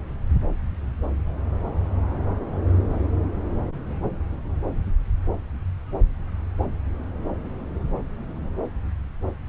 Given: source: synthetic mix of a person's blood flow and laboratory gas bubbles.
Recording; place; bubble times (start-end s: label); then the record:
Doppler ultrasound of blood flow; subclavian vein
no bubbles
From the record:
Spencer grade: 0 (complete lack of bubble signals)